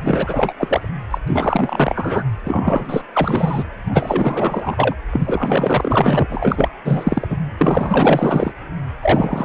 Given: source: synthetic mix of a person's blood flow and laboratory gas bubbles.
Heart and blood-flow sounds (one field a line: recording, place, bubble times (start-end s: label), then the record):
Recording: Doppler ultrasound of blood flow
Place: precordium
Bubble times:
0.05-0.53 s: bubbles
0.59-0.89 s: bubbles
1.10-1.19 s: bubbles
1.27-2.24 s: bubbles
2.46-3.02 s: bubbles
3.12-3.65 s: bubbles
3.88-4.96 s: bubbles
5.12-6.68 s: bubbles
6.84-7.38 s: bubbles
7.57-8.53 s: bubbles
9.03-9.45 s: bubbles
From the record:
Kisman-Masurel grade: 444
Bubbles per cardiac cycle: continuous sound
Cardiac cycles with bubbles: 100%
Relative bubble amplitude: maximal (0.775 to 0.999)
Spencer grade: 4 (maximum detectable bubble signal sounding continuously throughout systole and diastole of every cardiac period, and overriding the amplitude of the normal cardiac signals)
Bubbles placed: anywhere in the cardiac cycle